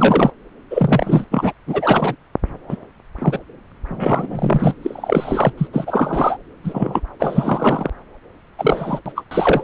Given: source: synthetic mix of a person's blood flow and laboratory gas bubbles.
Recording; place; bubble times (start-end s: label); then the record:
Doppler ultrasound of blood flow; subclavian vein
0.00-0.31 s: bubbles
0.70-1.25 s: bubbles
1.31-1.53 s: bubbles
1.67-2.15 s: bubbles
2.69-2.76 s: bubbles
3.19-3.39 s: bubbles
3.88-4.73 s: bubbles
4.81-5.52 s: bubbles
5.58-5.67 s: bubbles
5.73-6.37 s: bubbles
6.63-7.00 s: bubbles
7.20-7.90 s: bubbles
8.57-8.99 s: bubbles
9.05-9.12 s: bubbles
9.15-9.23 s: bubbles
9.31-9.63 s: bubbles
From the record:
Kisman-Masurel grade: 243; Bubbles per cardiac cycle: several, 3 to 8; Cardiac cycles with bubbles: 100%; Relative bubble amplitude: loud (0.450 to 0.775); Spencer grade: 3 (all of the cardiac periods contain showers or single bubble signals, but not dominating or overriding the cardiac motion signals); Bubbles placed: anywhere in the cardiac cycle